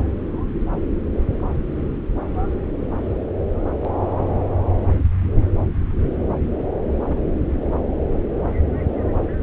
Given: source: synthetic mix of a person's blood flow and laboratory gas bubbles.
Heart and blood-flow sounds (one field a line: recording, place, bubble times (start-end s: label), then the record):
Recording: Doppler ultrasound of blood flow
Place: subclavian vein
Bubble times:
7.09-7.33 s: bubbles
From the record:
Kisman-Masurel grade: 111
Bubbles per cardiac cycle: 1 to 2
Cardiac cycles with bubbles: 1 to 10%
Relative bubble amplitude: barely perceptible (0.100 to 0.250)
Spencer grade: 1 (occasional bubble signal discernible with the cardiac motion signal, with majority of cardiac periods free of bubbles)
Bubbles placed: anywhere in the cardiac cycle